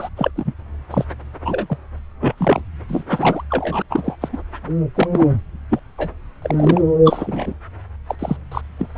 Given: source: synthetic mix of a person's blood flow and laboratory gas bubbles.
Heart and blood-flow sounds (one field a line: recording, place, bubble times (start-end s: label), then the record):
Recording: Doppler ultrasound of blood flow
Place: subclavian vein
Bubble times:
0.00-0.09 s: bubbles
0.16-0.31 s: bubbles
0.36-0.54 s: bubbles
0.91-1.05 s: bubbles
1.45-1.77 s: bubbles
1.97-2.00 s: bubbles
2.21-2.35 s: bubbles
2.37-2.62 s: bubbles
2.88-3.04 s: bubbles
3.10-3.44 s: bubbles
3.50-3.83 s: bubbles
3.90-4.16 s: bubbles
4.21-4.29 s: bubbles
4.33-4.38 s: bubbles
4.95-5.08 s: bubbles
5.13-5.28 s: bubbles
5.70-5.79 s: bubbles
5.98-6.09 s: bubbles
6.42-6.81 s: bubbles
7.04-7.54 s: bubbles
8.08-8.15 s: bubbles
8.19-8.36 s: bubbles
8.51-8.61 s: bubbles
8.78-8.88 s: bubbles
From the record:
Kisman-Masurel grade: 242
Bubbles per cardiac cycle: several, 3 to 8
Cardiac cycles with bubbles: 100%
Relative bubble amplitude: moderate (0.250 to 0.450)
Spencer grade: 3 (all of the cardiac periods contain showers or single bubble signals, but not dominating or overriding the cardiac motion signals)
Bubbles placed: anywhere in the cardiac cycle